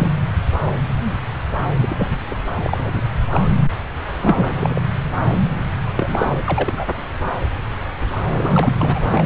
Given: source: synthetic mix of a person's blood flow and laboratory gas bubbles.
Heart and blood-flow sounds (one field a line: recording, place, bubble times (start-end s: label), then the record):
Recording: Doppler ultrasound of blood flow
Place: subclavian vein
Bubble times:
0.00-0.11 s: bubbles
1.77-2.08 s: bubbles
2.27-2.35 s: bubbles
2.58-3.00 s: bubbles
3.30-3.48 s: bubbles
4.21-4.82 s: bubbles
5.96-6.32 s: bubbles
6.46-6.72 s: bubbles
6.76-6.86 s: bubbles
8.24-8.72 s: bubbles
8.78-9.22 s: bubbles
From the record:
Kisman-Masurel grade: 232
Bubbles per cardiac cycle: several, 3 to 8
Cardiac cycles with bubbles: 50 to 99%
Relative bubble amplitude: moderate (0.250 to 0.450)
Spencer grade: 3 (all of the cardiac periods contain showers or single bubble signals, but not dominating or overriding the cardiac motion signals)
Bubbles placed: anywhere in the cardiac cycle